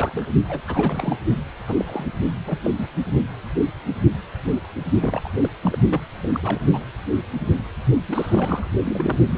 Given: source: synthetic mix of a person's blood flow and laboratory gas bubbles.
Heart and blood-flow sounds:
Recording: Doppler ultrasound of blood flow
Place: precordium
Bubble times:
0.00-0.32 s: bubbles
0.49-0.61 s: bubbles
0.68-1.16 s: bubbles
1.68-2.12 s: bubbles
2.46-2.59 s: bubbles
2.64-2.71 s: bubbles
2.78-2.85 s: bubbles
5.00-5.31 s: bubbles
5.41-5.49 s: bubbles
5.63-5.78 s: bubbles
5.90-6.01 s: bubbles
6.23-6.29 s: bubbles
6.33-6.40 s: bubbles
6.42-6.58 s: bubbles
6.70-6.79 s: bubbles
8.08-8.71 s: bubbles
8.84-9.26 s: bubbles
9.30-9.38 s: bubbles
From the record:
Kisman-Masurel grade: 232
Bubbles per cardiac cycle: several, 3 to 8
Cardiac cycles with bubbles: 50 to 99%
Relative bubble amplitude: moderate (0.250 to 0.450)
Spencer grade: 3 (all of the cardiac periods contain showers or single bubble signals, but not dominating or overriding the cardiac motion signals)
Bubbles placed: only in the low amplitude regions of the cardiac cycle

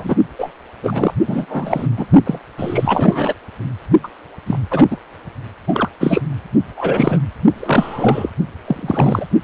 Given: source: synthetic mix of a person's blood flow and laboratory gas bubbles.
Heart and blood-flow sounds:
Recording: Doppler ultrasound of blood flow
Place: precordium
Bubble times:
0.00-0.16 s: bubbles
0.38-0.52 s: bubbles
0.83-1.13 s: bubbles
1.27-1.87 s: bubbles
1.97-2.06 s: bubbles
2.25-2.38 s: bubbles
2.57-3.34 s: bubbles
4.03-4.08 s: bubbles
4.46-4.58 s: bubbles
4.71-4.86 s: bubbles
4.91-4.97 s: bubbles
5.67-5.89 s: bubbles
6.00-6.22 s: bubbles
6.77-7.20 s: bubbles
7.57-8.30 s: bubbles
8.65-9.25 s: bubbles
From the record:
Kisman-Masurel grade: 243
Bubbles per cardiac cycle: several, 3 to 8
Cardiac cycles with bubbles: 100%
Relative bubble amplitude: loud (0.450 to 0.775)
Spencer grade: 3 (all of the cardiac periods contain showers or single bubble signals, but not dominating or overriding the cardiac motion signals)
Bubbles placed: only in the low amplitude regions of the cardiac cycle

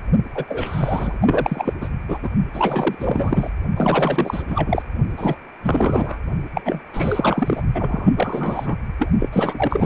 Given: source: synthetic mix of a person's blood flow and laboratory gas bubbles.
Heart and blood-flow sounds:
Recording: Doppler ultrasound of blood flow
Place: precordium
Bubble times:
0.34-0.45 s: bubbles
0.48-1.73 s: bubbles
1.80-1.90 s: bubbles
2.09-2.19 s: bubbles
2.22-2.30 s: bubbles
2.53-2.96 s: bubbles
2.99-3.51 s: bubbles
3.77-4.43 s: bubbles
4.47-4.83 s: bubbles
5.17-5.36 s: bubbles
5.62-6.21 s: bubbles
6.54-6.61 s: bubbles
6.64-6.80 s: bubbles
6.93-7.62 s: bubbles
7.74-8.77 s: bubbles
8.99-9.11 s: bubbles
9.19-9.29 s: bubbles
9.32-9.86 s: bubbles
From the record:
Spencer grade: 4 (maximum detectable bubble signal sounding continuously throughout systole and diastole of every cardiac period, and overriding the amplitude of the normal cardiac signals)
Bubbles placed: only in the low amplitude regions of the cardiac cycle

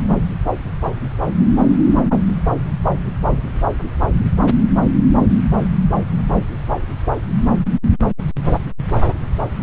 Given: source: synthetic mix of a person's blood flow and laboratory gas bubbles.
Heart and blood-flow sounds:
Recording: Doppler ultrasound of blood flow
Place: subclavian vein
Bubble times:
no bubbles
From the record:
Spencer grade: 0 (complete lack of bubble signals)

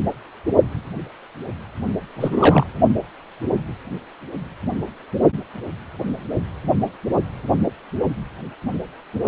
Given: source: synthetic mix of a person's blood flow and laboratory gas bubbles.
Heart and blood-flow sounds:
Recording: Doppler ultrasound of blood flow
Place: precordium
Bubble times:
2.15-2.67 s: bubbles
From the record:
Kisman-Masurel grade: 212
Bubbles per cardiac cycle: several, 3 to 8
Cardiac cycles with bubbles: 1 to 10%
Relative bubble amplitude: moderate (0.250 to 0.450)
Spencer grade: 1 (occasional bubble signal discernible with the cardiac motion signal, with majority of cardiac periods free of bubbles)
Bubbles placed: only in the low amplitude regions of the cardiac cycle

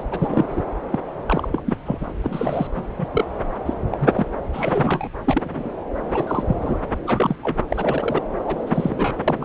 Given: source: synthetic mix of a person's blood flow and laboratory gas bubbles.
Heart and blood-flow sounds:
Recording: Doppler ultrasound of blood flow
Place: subclavian vein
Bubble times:
0.00-0.04 s: bubbles
0.11-0.61 s: bubbles
0.90-0.99 s: bubbles
1.26-1.48 s: bubbles
1.52-1.62 s: bubbles
1.66-1.77 s: bubbles
1.85-2.06 s: bubbles
2.23-2.68 s: bubbles
2.76-2.85 s: bubbles
2.98-3.07 s: bubbles
3.14-3.25 s: bubbles
3.65-3.73 s: bubbles
3.90-4.25 s: bubbles
4.52-5.08 s: bubbles
5.24-5.73 s: bubbles
6.05-6.43 s: bubbles
6.47-6.77 s: bubbles
7.06-7.35 s: bubbles
7.42-7.57 s: bubbles
7.68-8.23 s: bubbles
8.44-8.60 s: bubbles
8.67-9.15 s: bubbles
9.28-9.45 s: bubbles
From the record:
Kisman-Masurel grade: 242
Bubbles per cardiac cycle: several, 3 to 8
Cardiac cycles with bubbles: 100%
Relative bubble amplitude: moderate (0.250 to 0.450)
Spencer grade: 3 (all of the cardiac periods contain showers or single bubble signals, but not dominating or overriding the cardiac motion signals)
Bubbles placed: anywhere in the cardiac cycle

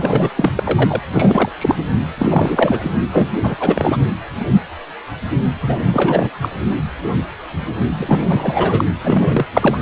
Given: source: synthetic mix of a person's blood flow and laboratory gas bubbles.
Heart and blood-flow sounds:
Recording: Doppler ultrasound of blood flow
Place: precordium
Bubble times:
0.00-0.29 s: bubbles
0.36-0.52 s: bubbles
0.57-0.99 s: bubbles
1.14-1.49 s: bubbles
1.57-1.75 s: bubbles
2.17-2.90 s: bubbles
3.11-3.29 s: bubbles
3.42-3.55 s: bubbles
3.59-3.97 s: bubbles
5.62-5.79 s: bubbles
5.85-6.30 s: bubbles
6.42-6.50 s: bubbles
7.99-8.85 s: bubbles
9.03-9.47 s: bubbles
9.53-9.81 s: bubbles
From the record:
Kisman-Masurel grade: 332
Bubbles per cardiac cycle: rolling drumbeat, 9 or more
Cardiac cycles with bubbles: 50 to 99%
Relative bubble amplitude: moderate (0.250 to 0.450)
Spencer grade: 3 (all of the cardiac periods contain showers or single bubble signals, but not dominating or overriding the cardiac motion signals)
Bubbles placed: anywhere in the cardiac cycle

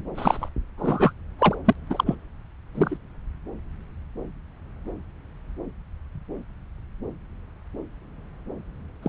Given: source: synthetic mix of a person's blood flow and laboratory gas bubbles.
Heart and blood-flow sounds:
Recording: Doppler ultrasound of blood flow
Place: subclavian vein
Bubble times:
0.15-0.49 s: bubbles
0.78-1.13 s: bubbles
1.39-1.55 s: bubbles
1.65-1.73 s: bubbles
1.90-2.15 s: bubbles
2.75-2.97 s: bubbles
9.02-9.09 s: bubbles
From the record:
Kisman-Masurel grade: 223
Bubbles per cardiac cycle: several, 3 to 8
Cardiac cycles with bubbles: 10 to 50%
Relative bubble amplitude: loud (0.450 to 0.775)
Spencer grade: 2 (many but less than half of the cardiac periods contain bubble signals, singularly or in groups)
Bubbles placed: anywhere in the cardiac cycle

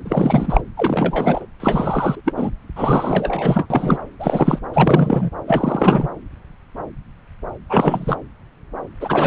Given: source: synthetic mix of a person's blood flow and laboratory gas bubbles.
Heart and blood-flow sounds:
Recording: Doppler ultrasound of blood flow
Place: subclavian vein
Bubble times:
0.05-0.61 s: bubbles
0.77-1.46 s: bubbles
1.60-2.21 s: bubbles
2.25-2.33 s: bubbles
2.36-2.50 s: bubbles
2.75-3.67 s: bubbles
3.70-3.98 s: bubbles
4.19-4.59 s: bubbles
4.73-5.30 s: bubbles
5.47-6.07 s: bubbles
7.69-8.15 s: bubbles
9.00-9.27 s: bubbles
From the record:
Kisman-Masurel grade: 333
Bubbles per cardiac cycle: rolling drumbeat, 9 or more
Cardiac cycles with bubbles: 50 to 99%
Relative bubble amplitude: loud (0.450 to 0.775)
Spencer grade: 3 (all of the cardiac periods contain showers or single bubble signals, but not dominating or overriding the cardiac motion signals)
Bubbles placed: anywhere in the cardiac cycle

